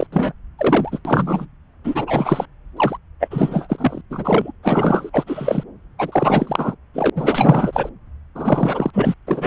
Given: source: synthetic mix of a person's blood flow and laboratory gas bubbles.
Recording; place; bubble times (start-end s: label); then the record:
Doppler ultrasound of blood flow; subclavian vein
0.00-0.07 s: bubbles
0.12-0.32 s: bubbles
0.58-0.99 s: bubbles
1.05-1.46 s: bubbles
1.84-2.46 s: bubbles
2.77-2.97 s: bubbles
3.20-3.28 s: bubbles
3.31-4.02 s: bubbles
4.10-4.52 s: bubbles
4.63-5.09 s: bubbles
5.12-5.24 s: bubbles
5.27-5.63 s: bubbles
5.98-6.75 s: bubbles
6.94-7.10 s: bubbles
7.16-7.90 s: bubbles
8.35-8.90 s: bubbles
8.93-9.14 s: bubbles
9.27-9.47 s: bubbles
From the record:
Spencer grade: 4 (maximum detectable bubble signal sounding continuously throughout systole and diastole of every cardiac period, and overriding the amplitude of the normal cardiac signals); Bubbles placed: anywhere in the cardiac cycle